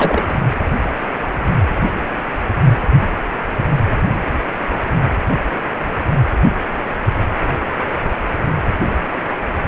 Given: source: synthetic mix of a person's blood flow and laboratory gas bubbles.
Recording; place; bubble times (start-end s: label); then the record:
Doppler ultrasound of blood flow; precordium
0.00-0.41 s: bubbles
From the record:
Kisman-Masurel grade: 212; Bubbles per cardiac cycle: several, 3 to 8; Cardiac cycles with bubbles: 1 to 10%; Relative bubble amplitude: moderate (0.250 to 0.450); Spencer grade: 1 (occasional bubble signal discernible with the cardiac motion signal, with majority of cardiac periods free of bubbles); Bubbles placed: anywhere in the cardiac cycle